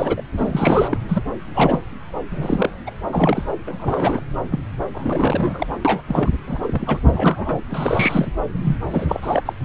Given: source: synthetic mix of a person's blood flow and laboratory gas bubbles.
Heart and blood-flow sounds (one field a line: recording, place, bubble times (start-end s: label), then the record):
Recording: Doppler ultrasound of blood flow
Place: subclavian vein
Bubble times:
0.00-0.22 s: bubbles
0.35-0.97 s: bubbles
1.09-1.23 s: bubbles
1.54-1.80 s: bubbles
2.31-2.69 s: bubbles
2.86-2.90 s: bubbles
3.11-3.46 s: bubbles
3.67-4.20 s: bubbles
4.51-4.59 s: bubbles
4.94-5.67 s: bubbles
5.84-6.01 s: bubbles
6.07-6.29 s: bubbles
6.46-6.59 s: bubbles
6.66-6.99 s: bubbles
7.09-7.60 s: bubbles
7.70-8.31 s: bubbles
8.63-8.76 s: bubbles
8.91-9.06 s: bubbles
9.08-9.43 s: bubbles
9.45-9.53 s: bubbles
From the record:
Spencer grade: 3 (all of the cardiac periods contain showers or single bubble signals, but not dominating or overriding the cardiac motion signals)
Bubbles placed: anywhere in the cardiac cycle